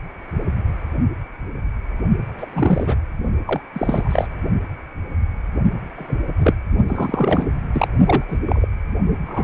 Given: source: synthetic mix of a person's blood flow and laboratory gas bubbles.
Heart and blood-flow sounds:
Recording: Doppler ultrasound of blood flow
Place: precordium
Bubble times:
2.37-2.46 s: bubbles
2.53-2.96 s: bubbles
3.46-3.61 s: bubbles
3.73-4.28 s: bubbles
5.96-6.18 s: bubbles
6.38-6.54 s: bubbles
6.88-7.47 s: bubbles
7.73-7.88 s: bubbles
8.05-8.24 s: bubbles
8.27-8.39 s: bubbles
8.45-8.66 s: bubbles
9.26-9.44 s: bubbles
From the record:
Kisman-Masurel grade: 233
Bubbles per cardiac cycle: several, 3 to 8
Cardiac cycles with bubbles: 50 to 99%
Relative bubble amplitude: loud (0.450 to 0.775)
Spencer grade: 3 (all of the cardiac periods contain showers or single bubble signals, but not dominating or overriding the cardiac motion signals)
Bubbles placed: only in the low amplitude regions of the cardiac cycle

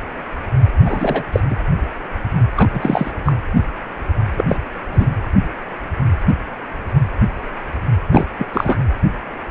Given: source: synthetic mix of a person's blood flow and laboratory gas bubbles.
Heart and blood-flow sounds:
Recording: Doppler ultrasound of blood flow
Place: precordium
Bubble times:
0.85-1.23 s: bubbles
1.32-1.40 s: bubbles
1.50-1.56 s: bubbles
2.56-2.69 s: bubbles
2.73-3.11 s: bubbles
3.25-3.33 s: bubbles
4.37-4.45 s: bubbles
4.48-4.57 s: bubbles
4.92-5.08 s: bubbles
8.10-8.25 s: bubbles
8.38-8.46 s: bubbles
8.54-8.80 s: bubbles
From the record:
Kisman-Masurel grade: 223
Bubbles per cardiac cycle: several, 3 to 8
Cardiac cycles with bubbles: 10 to 50%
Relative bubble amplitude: loud (0.450 to 0.775)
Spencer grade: 2 (many but less than half of the cardiac periods contain bubble signals, singularly or in groups)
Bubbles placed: anywhere in the cardiac cycle

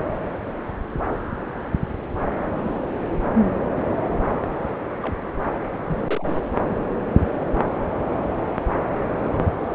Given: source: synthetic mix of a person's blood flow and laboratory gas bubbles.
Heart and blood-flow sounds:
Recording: Doppler ultrasound of blood flow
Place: subclavian vein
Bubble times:
2.63-2.79 s: bubbles
5.01-5.15 s: bubbles
5.86-6.29 s: bubbles
9.11-9.49 s: bubbles
From the record:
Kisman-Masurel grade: 121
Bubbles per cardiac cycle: 1 to 2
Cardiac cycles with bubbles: 10 to 50%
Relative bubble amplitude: barely perceptible (0.100 to 0.250)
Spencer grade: 2 (many but less than half of the cardiac periods contain bubble signals, singularly or in groups)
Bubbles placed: anywhere in the cardiac cycle

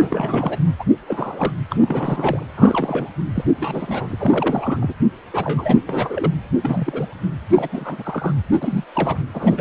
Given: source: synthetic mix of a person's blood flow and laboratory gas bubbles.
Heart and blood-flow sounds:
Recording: Doppler ultrasound of blood flow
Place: precordium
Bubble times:
0.00-0.59 s: bubbles
0.78-0.84 s: bubbles
1.08-1.52 s: bubbles
1.70-1.76 s: bubbles
1.81-2.48 s: bubbles
2.57-3.08 s: bubbles
3.35-3.44 s: bubbles
3.60-4.93 s: bubbles
5.32-5.83 s: bubbles
5.86-6.31 s: bubbles
6.63-7.07 s: bubbles
7.50-7.68 s: bubbles
7.72-8.33 s: bubbles
8.61-8.84 s: bubbles
8.94-9.22 s: bubbles
9.33-9.61 s: bubbles
From the record:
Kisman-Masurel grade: 342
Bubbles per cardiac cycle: rolling drumbeat, 9 or more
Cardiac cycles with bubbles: 100%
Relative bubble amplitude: moderate (0.250 to 0.450)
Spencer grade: 3 (all of the cardiac periods contain showers or single bubble signals, but not dominating or overriding the cardiac motion signals)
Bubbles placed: anywhere in the cardiac cycle

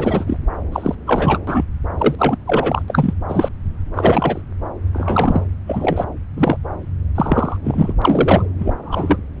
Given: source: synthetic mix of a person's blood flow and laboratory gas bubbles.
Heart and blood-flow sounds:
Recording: Doppler ultrasound of blood flow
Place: subclavian vein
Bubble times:
0.00-0.39 s: bubbles
0.72-0.95 s: bubbles
1.06-1.39 s: bubbles
1.47-1.65 s: bubbles
1.98-2.15 s: bubbles
2.18-2.36 s: bubbles
2.46-2.83 s: bubbles
2.88-3.13 s: bubbles
3.28-3.48 s: bubbles
3.94-4.42 s: bubbles
4.93-5.44 s: bubbles
5.67-6.06 s: bubbles
6.36-6.57 s: bubbles
7.14-7.57 s: bubbles
7.63-7.93 s: bubbles
8.02-8.46 s: bubbles
8.58-8.74 s: bubbles
8.83-9.18 s: bubbles
From the record:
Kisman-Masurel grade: 243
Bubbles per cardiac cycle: several, 3 to 8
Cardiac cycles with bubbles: 100%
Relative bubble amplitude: loud (0.450 to 0.775)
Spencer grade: 3 (all of the cardiac periods contain showers or single bubble signals, but not dominating or overriding the cardiac motion signals)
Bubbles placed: anywhere in the cardiac cycle

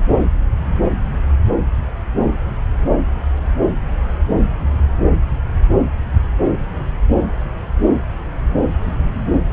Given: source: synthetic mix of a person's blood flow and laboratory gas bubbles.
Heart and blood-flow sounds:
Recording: Doppler ultrasound of blood flow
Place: subclavian vein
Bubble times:
no bubbles
From the record:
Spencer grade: 0 (complete lack of bubble signals)

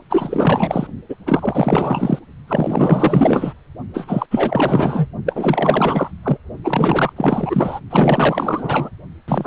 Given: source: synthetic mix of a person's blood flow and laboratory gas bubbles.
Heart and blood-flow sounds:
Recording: Doppler ultrasound of blood flow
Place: precordium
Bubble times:
0.09-0.87 s: bubbles
1.09-1.16 s: bubbles
1.26-2.19 s: bubbles
2.47-3.54 s: bubbles
3.94-4.26 s: bubbles
4.31-5.08 s: bubbles
5.25-6.12 s: bubbles
6.23-6.38 s: bubbles
6.64-7.13 s: bubbles
7.16-7.80 s: bubbles
7.90-8.89 s: bubbles
9.28-9.47 s: bubbles
From the record:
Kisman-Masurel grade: 444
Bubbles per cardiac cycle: continuous sound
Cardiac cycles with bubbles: 100%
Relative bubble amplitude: maximal (0.775 to 0.999)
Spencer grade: 4 (maximum detectable bubble signal sounding continuously throughout systole and diastole of every cardiac period, and overriding the amplitude of the normal cardiac signals)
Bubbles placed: only in the low amplitude regions of the cardiac cycle

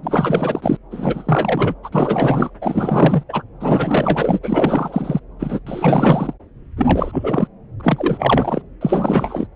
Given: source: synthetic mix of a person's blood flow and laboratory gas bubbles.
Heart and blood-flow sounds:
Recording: Doppler ultrasound of blood flow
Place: subclavian vein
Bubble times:
0.02-0.77 s: bubbles
0.91-1.75 s: bubbles
1.83-1.90 s: bubbles
1.92-2.50 s: bubbles
2.61-3.24 s: bubbles
3.29-3.44 s: bubbles
3.60-4.39 s: bubbles
4.43-5.20 s: bubbles
5.39-5.59 s: bubbles
5.67-6.33 s: bubbles
6.77-7.47 s: bubbles
7.79-8.62 s: bubbles
8.81-9.47 s: bubbles
From the record:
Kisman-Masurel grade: 444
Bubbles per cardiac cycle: continuous sound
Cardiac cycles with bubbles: 100%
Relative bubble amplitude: maximal (0.775 to 0.999)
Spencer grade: 4 (maximum detectable bubble signal sounding continuously throughout systole and diastole of every cardiac period, and overriding the amplitude of the normal cardiac signals)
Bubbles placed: anywhere in the cardiac cycle

